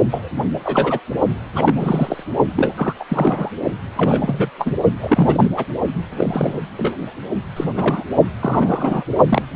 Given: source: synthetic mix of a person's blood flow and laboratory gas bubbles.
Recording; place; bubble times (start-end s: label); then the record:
Doppler ultrasound of blood flow; precordium
0.11-0.29 s: bubbles
0.64-1.00 s: bubbles
1.55-2.23 s: bubbles
2.56-2.73 s: bubbles
2.77-2.93 s: bubbles
3.00-3.04 s: bubbles
3.09-3.51 s: bubbles
3.96-4.50 s: bubbles
4.58-4.75 s: bubbles
5.00-5.53 s: bubbles
5.56-5.65 s: bubbles
6.09-6.59 s: bubbles
6.78-6.95 s: bubbles
7.56-7.64 s: bubbles
7.74-8.04 s: bubbles
8.40-9.04 s: bubbles
9.29-9.42 s: bubbles
9.54-9.56 s: bubbles
From the record:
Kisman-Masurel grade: 242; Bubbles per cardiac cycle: several, 3 to 8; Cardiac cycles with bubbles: 100%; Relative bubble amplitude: moderate (0.250 to 0.450); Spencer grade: 3 (all of the cardiac periods contain showers or single bubble signals, but not dominating or overriding the cardiac motion signals); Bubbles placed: only in the low amplitude regions of the cardiac cycle